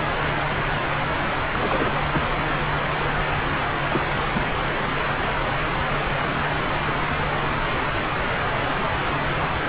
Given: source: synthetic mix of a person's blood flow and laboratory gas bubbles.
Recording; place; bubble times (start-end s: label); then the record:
Doppler ultrasound of blood flow; subclavian vein
1.51-1.91 s: bubbles
2.12-2.21 s: bubbles
3.89-4.00 s: bubbles
4.34-4.41 s: bubbles
From the record:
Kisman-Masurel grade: 221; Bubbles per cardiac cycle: several, 3 to 8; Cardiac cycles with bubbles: 10 to 50%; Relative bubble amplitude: barely perceptible (0.100 to 0.250); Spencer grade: 2 (many but less than half of the cardiac periods contain bubble signals, singularly or in groups); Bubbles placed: anywhere in the cardiac cycle